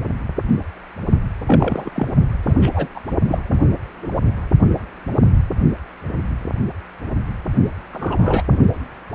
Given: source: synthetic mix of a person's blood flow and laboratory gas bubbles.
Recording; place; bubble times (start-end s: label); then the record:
Doppler ultrasound of blood flow; precordium
1.47-1.90 s: bubbles
1.94-2.07 s: bubbles
2.46-2.54 s: bubbles
2.62-2.70 s: bubbles
2.73-2.88 s: bubbles
2.95-3.00 s: bubbles
3.28-3.39 s: bubbles
3.48-3.60 s: bubbles
4.02-4.07 s: bubbles
7.93-8.45 s: bubbles
8.49-8.58 s: bubbles
From the record:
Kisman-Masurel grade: 222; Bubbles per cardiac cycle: several, 3 to 8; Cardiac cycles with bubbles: 10 to 50%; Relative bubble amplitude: moderate (0.250 to 0.450); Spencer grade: 2 (many but less than half of the cardiac periods contain bubble signals, singularly or in groups); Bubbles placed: only in the low amplitude regions of the cardiac cycle